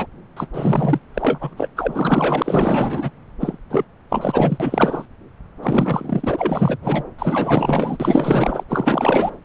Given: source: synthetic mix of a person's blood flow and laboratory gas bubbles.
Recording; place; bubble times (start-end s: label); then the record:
Doppler ultrasound of blood flow; subclavian vein
0.00-0.06 s: bubbles
0.36-0.47 s: bubbles
0.53-0.99 s: bubbles
1.14-1.53 s: bubbles
1.56-1.69 s: bubbles
1.76-3.10 s: bubbles
3.40-3.58 s: bubbles
3.70-3.84 s: bubbles
4.09-5.05 s: bubbles
5.62-6.77 s: bubbles
6.81-7.04 s: bubbles
7.18-8.63 s: bubbles
8.69-9.34 s: bubbles
From the record:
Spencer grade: 4 (maximum detectable bubble signal sounding continuously throughout systole and diastole of every cardiac period, and overriding the amplitude of the normal cardiac signals); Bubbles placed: anywhere in the cardiac cycle